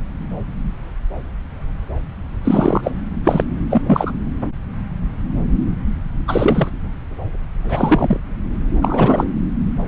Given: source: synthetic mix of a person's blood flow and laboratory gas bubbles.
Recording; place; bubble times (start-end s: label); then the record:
Doppler ultrasound of blood flow; subclavian vein
2.44-2.91 s: bubbles
3.23-3.44 s: bubbles
3.70-3.81 s: bubbles
3.86-4.12 s: bubbles
6.27-6.71 s: bubbles
7.62-8.20 s: bubbles
8.81-9.27 s: bubbles
From the record:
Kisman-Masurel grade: 223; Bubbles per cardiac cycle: several, 3 to 8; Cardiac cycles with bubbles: 10 to 50%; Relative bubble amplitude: loud (0.450 to 0.775); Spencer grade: 2 (many but less than half of the cardiac periods contain bubble signals, singularly or in groups); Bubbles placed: anywhere in the cardiac cycle